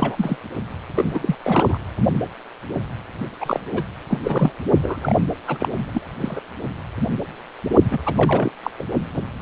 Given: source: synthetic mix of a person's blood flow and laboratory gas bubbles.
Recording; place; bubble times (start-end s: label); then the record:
Doppler ultrasound of blood flow; precordium
0.00-0.37 s: bubbles
0.94-1.35 s: bubbles
1.43-1.80 s: bubbles
3.40-3.60 s: bubbles
3.73-3.83 s: bubbles
4.08-4.18 s: bubbles
4.24-4.53 s: bubbles
4.82-5.17 s: bubbles
5.47-5.68 s: bubbles
5.77-6.04 s: bubbles
6.20-6.41 s: bubbles
7.90-7.99 s: bubbles
8.05-8.13 s: bubbles
8.17-8.52 s: bubbles
8.62-8.71 s: bubbles
8.79-8.83 s: bubbles
From the record:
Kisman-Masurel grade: 332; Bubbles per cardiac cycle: rolling drumbeat, 9 or more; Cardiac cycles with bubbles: 50 to 99%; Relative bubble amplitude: moderate (0.250 to 0.450); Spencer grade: 3 (all of the cardiac periods contain showers or single bubble signals, but not dominating or overriding the cardiac motion signals); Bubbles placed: only in the low amplitude regions of the cardiac cycle